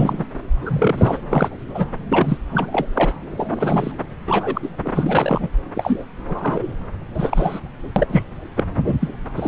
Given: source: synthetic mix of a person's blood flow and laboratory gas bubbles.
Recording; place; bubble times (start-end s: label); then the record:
Doppler ultrasound of blood flow; subclavian vein
0.00-0.28 s: bubbles
0.65-1.20 s: bubbles
1.30-1.48 s: bubbles
1.74-1.88 s: bubbles
2.08-2.38 s: bubbles
2.50-2.86 s: bubbles
2.95-3.15 s: bubbles
3.36-3.92 s: bubbles
4.26-4.70 s: bubbles
4.84-4.91 s: bubbles
4.95-5.48 s: bubbles
5.75-6.04 s: bubbles
6.28-6.68 s: bubbles
7.14-7.60 s: bubbles
7.96-8.06 s: bubbles
8.09-8.23 s: bubbles
8.55-8.63 s: bubbles
8.84-8.95 s: bubbles
9.01-9.10 s: bubbles
9.36-9.48 s: bubbles
From the record:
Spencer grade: 3 (all of the cardiac periods contain showers or single bubble signals, but not dominating or overriding the cardiac motion signals); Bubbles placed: anywhere in the cardiac cycle